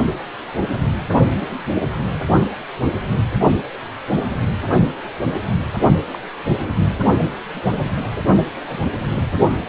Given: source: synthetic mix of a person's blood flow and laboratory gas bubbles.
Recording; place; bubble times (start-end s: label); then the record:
Doppler ultrasound of blood flow; precordium
6.13-6.18 s: bubbles
6.56-7.00 s: bubbles
7.25-7.31 s: bubbles
7.63-7.96 s: bubbles
8.03-8.11 s: bubbles
8.62-8.78 s: bubbles
9.16-9.21 s: bubbles
From the record:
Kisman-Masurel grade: 221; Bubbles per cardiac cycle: several, 3 to 8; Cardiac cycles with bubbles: 10 to 50%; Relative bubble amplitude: barely perceptible (0.100 to 0.250); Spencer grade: 2 (many but less than half of the cardiac periods contain bubble signals, singularly or in groups); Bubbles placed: only in the low amplitude regions of the cardiac cycle